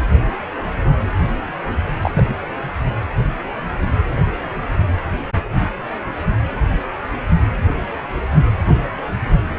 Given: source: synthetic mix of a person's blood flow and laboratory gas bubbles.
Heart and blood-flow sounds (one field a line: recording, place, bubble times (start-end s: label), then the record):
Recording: Doppler ultrasound of blood flow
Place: precordium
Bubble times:
2.02-2.11 s: bubbles
2.13-2.31 s: bubbles
From the record:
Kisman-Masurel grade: 222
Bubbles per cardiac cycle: several, 3 to 8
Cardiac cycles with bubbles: 10 to 50%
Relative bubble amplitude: moderate (0.250 to 0.450)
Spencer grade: 2 (many but less than half of the cardiac periods contain bubble signals, singularly or in groups)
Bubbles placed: anywhere in the cardiac cycle